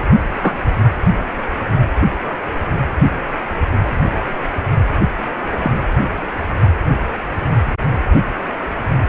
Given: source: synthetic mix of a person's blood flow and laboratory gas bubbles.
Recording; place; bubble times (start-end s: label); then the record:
Doppler ultrasound of blood flow; precordium
0.42-0.54 s: bubbles
5.62-5.71 s: bubbles
From the record:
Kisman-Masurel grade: 123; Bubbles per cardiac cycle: 1 to 2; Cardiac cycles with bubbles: 10 to 50%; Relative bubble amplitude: loud (0.450 to 0.775); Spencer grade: 2 (many but less than half of the cardiac periods contain bubble signals, singularly or in groups); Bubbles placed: only in the low amplitude regions of the cardiac cycle